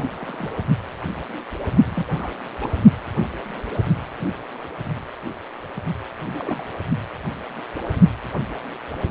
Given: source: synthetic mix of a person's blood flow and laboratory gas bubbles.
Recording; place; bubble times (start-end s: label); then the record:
Doppler ultrasound of blood flow; precordium
0.00-0.09 s: bubbles
0.20-0.56 s: bubbles
1.84-2.05 s: bubbles
2.07-2.33 s: bubbles
2.60-2.74 s: bubbles
6.19-6.63 s: bubbles
From the record:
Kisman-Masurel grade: 221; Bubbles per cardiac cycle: several, 3 to 8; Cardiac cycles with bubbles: 10 to 50%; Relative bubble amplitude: barely perceptible (0.100 to 0.250); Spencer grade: 2 (many but less than half of the cardiac periods contain bubble signals, singularly or in groups); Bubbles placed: only in the low amplitude regions of the cardiac cycle